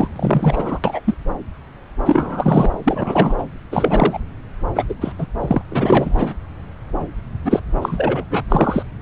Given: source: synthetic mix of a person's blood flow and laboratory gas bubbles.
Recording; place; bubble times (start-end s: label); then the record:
Doppler ultrasound of blood flow; subclavian vein
0.00-0.08 s: bubbles
0.16-0.79 s: bubbles
0.83-1.00 s: bubbles
1.04-1.15 s: bubbles
2.04-2.74 s: bubbles
2.84-3.35 s: bubbles
3.38-3.44 s: bubbles
3.71-4.19 s: bubbles
4.75-4.83 s: bubbles
4.89-4.93 s: bubbles
5.00-5.12 s: bubbles
5.18-5.26 s: bubbles
5.40-5.62 s: bubbles
5.71-6.33 s: bubbles
7.44-7.60 s: bubbles
7.81-8.25 s: bubbles
8.30-8.44 s: bubbles
8.48-8.82 s: bubbles
From the record:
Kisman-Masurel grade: 333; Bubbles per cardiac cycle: rolling drumbeat, 9 or more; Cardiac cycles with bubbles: 50 to 99%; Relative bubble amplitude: loud (0.450 to 0.775); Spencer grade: 3 (all of the cardiac periods contain showers or single bubble signals, but not dominating or overriding the cardiac motion signals); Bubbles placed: anywhere in the cardiac cycle